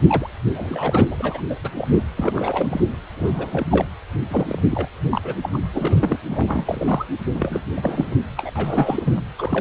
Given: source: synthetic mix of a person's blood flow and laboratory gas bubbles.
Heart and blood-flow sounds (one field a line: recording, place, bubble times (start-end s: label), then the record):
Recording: Doppler ultrasound of blood flow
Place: precordium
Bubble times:
0.07-0.30 s: bubbles
0.52-1.42 s: bubbles
1.50-1.55 s: bubbles
1.64-1.71 s: bubbles
1.77-1.88 s: bubbles
1.92-2.03 s: bubbles
2.16-2.81 s: bubbles
3.17-3.86 s: bubbles
4.28-4.59 s: bubbles
4.70-4.89 s: bubbles
5.11-5.34 s: bubbles
5.41-5.49 s: bubbles
5.52-5.60 s: bubbles
5.73-6.18 s: bubbles
6.27-7.05 s: bubbles
7.34-7.60 s: bubbles
7.76-8.18 s: bubbles
8.37-8.52 s: bubbles
8.55-9.21 s: bubbles
9.38-9.61 s: bubbles
From the record:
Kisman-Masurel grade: 342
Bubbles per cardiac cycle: rolling drumbeat, 9 or more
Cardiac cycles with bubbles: 100%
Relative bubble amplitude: moderate (0.250 to 0.450)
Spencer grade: 3 (all of the cardiac periods contain showers or single bubble signals, but not dominating or overriding the cardiac motion signals)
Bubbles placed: anywhere in the cardiac cycle